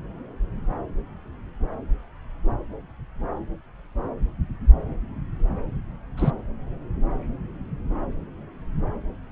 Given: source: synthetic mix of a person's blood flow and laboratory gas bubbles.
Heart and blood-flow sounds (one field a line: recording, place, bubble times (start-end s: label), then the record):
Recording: Doppler ultrasound of blood flow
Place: subclavian vein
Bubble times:
6.17-6.31 s: bubbles
From the record:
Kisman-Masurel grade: 112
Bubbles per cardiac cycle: 1 to 2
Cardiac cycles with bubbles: 1 to 10%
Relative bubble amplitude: moderate (0.250 to 0.450)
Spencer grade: 1 (occasional bubble signal discernible with the cardiac motion signal, with majority of cardiac periods free of bubbles)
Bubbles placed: anywhere in the cardiac cycle